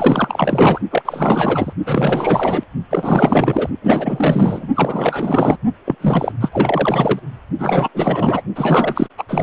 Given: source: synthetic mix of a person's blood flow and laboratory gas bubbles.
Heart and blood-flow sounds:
Doppler ultrasound of blood flow; precordium
0.00-0.81 s: bubbles
0.91-1.02 s: bubbles
1.05-1.73 s: bubbles
1.86-2.64 s: bubbles
2.90-3.69 s: bubbles
3.82-4.68 s: bubbles
4.75-5.58 s: bubbles
5.85-5.96 s: bubbles
6.00-6.32 s: bubbles
6.41-6.49 s: bubbles
6.52-7.20 s: bubbles
7.58-7.89 s: bubbles
7.94-8.42 s: bubbles
8.55-9.07 s: bubbles
9.17-9.24 s: bubbles
9.28-9.43 s: bubbles
From the record:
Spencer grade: 4 (maximum detectable bubble signal sounding continuously throughout systole and diastole of every cardiac period, and overriding the amplitude of the normal cardiac signals); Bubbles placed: only in the low amplitude regions of the cardiac cycle

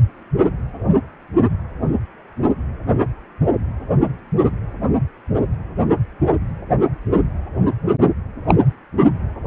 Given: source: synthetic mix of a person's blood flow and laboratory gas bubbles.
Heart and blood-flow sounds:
Doppler ultrasound of blood flow; precordium
8.47-8.55 s: bubbles
From the record:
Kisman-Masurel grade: 113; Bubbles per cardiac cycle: 1 to 2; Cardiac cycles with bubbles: 1 to 10%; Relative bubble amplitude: loud (0.450 to 0.775); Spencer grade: 1 (occasional bubble signal discernible with the cardiac motion signal, with majority of cardiac periods free of bubbles); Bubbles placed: anywhere in the cardiac cycle

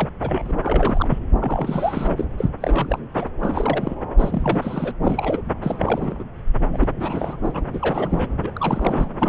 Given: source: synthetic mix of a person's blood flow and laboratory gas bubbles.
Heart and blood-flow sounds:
Doppler ultrasound of blood flow; subclavian vein
0.00-0.09 s: bubbles
0.22-0.52 s: bubbles
0.61-1.19 s: bubbles
1.40-2.25 s: bubbles
2.38-2.48 s: bubbles
2.60-2.99 s: bubbles
3.14-3.27 s: bubbles
3.40-3.96 s: bubbles
4.18-4.94 s: bubbles
5.04-5.42 s: bubbles
5.62-6.24 s: bubbles
6.71-6.92 s: bubbles
7.00-7.37 s: bubbles
7.43-7.64 s: bubbles
7.72-8.52 s: bubbles
8.56-9.09 s: bubbles
9.20-9.29 s: bubbles
From the record:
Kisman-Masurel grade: 342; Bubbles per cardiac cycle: rolling drumbeat, 9 or more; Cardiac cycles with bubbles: 100%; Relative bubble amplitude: moderate (0.250 to 0.450); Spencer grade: 3 (all of the cardiac periods contain showers or single bubble signals, but not dominating or overriding the cardiac motion signals); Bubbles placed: anywhere in the cardiac cycle

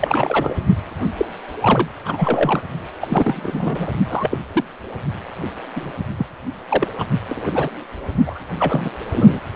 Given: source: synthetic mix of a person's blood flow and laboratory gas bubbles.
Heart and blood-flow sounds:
Doppler ultrasound of blood flow; precordium
0.00-0.55 s: bubbles
1.17-1.25 s: bubbles
1.60-1.88 s: bubbles
2.05-2.61 s: bubbles
3.01-3.88 s: bubbles
4.10-4.38 s: bubbles
4.53-4.63 s: bubbles
5.75-5.92 s: bubbles
6.18-6.26 s: bubbles
6.68-6.88 s: bubbles
6.98-7.05 s: bubbles
7.28-7.70 s: bubbles
8.27-8.38 s: bubbles
8.59-8.90 s: bubbles
9.12-9.41 s: bubbles
From the record:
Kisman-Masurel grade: 232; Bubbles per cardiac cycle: several, 3 to 8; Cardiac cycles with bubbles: 50 to 99%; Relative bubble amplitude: moderate (0.250 to 0.450); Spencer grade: 3 (all of the cardiac periods contain showers or single bubble signals, but not dominating or overriding the cardiac motion signals); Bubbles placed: anywhere in the cardiac cycle

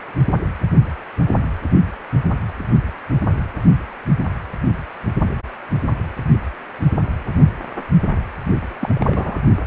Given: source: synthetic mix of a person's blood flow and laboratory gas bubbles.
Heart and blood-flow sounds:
Doppler ultrasound of blood flow; precordium
8.81-9.39 s: bubbles
From the record:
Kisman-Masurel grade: 112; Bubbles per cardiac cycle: 1 to 2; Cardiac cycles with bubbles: 1 to 10%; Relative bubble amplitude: moderate (0.250 to 0.450); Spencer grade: 1 (occasional bubble signal discernible with the cardiac motion signal, with majority of cardiac periods free of bubbles); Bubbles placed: only in the low amplitude regions of the cardiac cycle

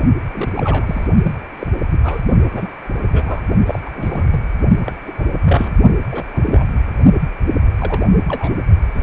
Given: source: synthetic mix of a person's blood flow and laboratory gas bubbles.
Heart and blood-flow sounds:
Doppler ultrasound of blood flow; precordium
0.32-0.50 s: bubbles
0.55-1.07 s: bubbles
1.23-1.35 s: bubbles
1.59-1.67 s: bubbles
1.92-2.00 s: bubbles
2.03-2.21 s: bubbles
2.52-2.69 s: bubbles
3.12-3.42 s: bubbles
3.66-3.79 s: bubbles
3.85-3.90 s: bubbles
3.95-4.41 s: bubbles
4.85-4.93 s: bubbles
5.07-5.12 s: bubbles
5.18-5.32 s: bubbles
5.46-5.74 s: bubbles
6.11-6.24 s: bubbles
6.34-6.64 s: bubbles
6.76-6.83 s: bubbles
7.78-8.06 s: bubbles
8.28-8.54 s: bubbles
8.94-9.03 s: bubbles
From the record:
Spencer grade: 3 (all of the cardiac periods contain showers or single bubble signals, but not dominating or overriding the cardiac motion signals); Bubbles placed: only in the low amplitude regions of the cardiac cycle

